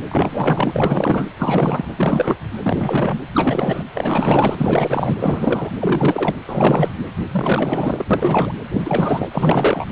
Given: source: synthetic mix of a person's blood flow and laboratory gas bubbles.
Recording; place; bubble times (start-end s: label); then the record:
Doppler ultrasound of blood flow; precordium
0.07-1.25 s: bubbles
1.38-1.88 s: bubbles
1.97-2.36 s: bubbles
2.62-3.21 s: bubbles
3.33-3.83 s: bubbles
3.94-5.17 s: bubbles
5.19-5.71 s: bubbles
5.80-6.36 s: bubbles
6.46-6.92 s: bubbles
7.31-8.05 s: bubbles
8.11-8.55 s: bubbles
8.71-9.28 s: bubbles
9.31-9.85 s: bubbles
From the record:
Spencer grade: 4 (maximum detectable bubble signal sounding continuously throughout systole and diastole of every cardiac period, and overriding the amplitude of the normal cardiac signals); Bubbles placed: anywhere in the cardiac cycle